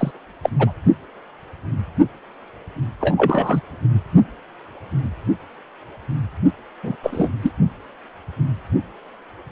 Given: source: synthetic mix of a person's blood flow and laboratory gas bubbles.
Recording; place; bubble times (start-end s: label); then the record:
Doppler ultrasound of blood flow; precordium
0.00-0.11 s: bubbles
0.42-0.50 s: bubbles
0.58-0.73 s: bubbles
3.00-3.60 s: bubbles
6.83-6.96 s: bubbles
7.03-7.29 s: bubbles
7.41-7.52 s: bubbles
From the record:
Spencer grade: 2 (many but less than half of the cardiac periods contain bubble signals, singularly or in groups); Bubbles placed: only in the low amplitude regions of the cardiac cycle